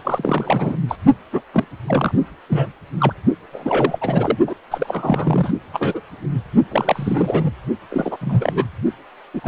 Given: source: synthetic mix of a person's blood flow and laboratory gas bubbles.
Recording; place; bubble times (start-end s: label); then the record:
Doppler ultrasound of blood flow; precordium
0.04-0.76 s: bubbles
0.88-0.96 s: bubbles
1.32-1.42 s: bubbles
1.53-1.67 s: bubbles
1.87-2.12 s: bubbles
2.48-2.71 s: bubbles
3.00-3.13 s: bubbles
3.52-3.99 s: bubbles
4.01-4.38 s: bubbles
4.46-4.54 s: bubbles
4.71-5.51 s: bubbles
5.73-6.01 s: bubbles
6.71-7.51 s: bubbles
7.90-8.16 s: bubbles
8.21-8.65 s: bubbles
9.34-9.40 s: bubbles
9.44-9.48 s: bubbles
From the record:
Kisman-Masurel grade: 342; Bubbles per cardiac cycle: rolling drumbeat, 9 or more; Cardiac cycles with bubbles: 100%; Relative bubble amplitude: moderate (0.250 to 0.450); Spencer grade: 3 (all of the cardiac periods contain showers or single bubble signals, but not dominating or overriding the cardiac motion signals); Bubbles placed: only in the low amplitude regions of the cardiac cycle